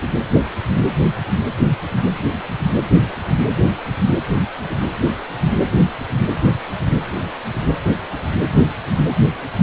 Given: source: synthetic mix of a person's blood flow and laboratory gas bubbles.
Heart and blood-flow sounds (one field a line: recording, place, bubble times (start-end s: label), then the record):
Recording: Doppler ultrasound of blood flow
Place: precordium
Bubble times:
no bubbles
From the record:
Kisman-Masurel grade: 000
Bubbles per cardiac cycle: 0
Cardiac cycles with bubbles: 0%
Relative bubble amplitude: no bubbles discernible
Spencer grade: 0 (complete lack of bubble signals)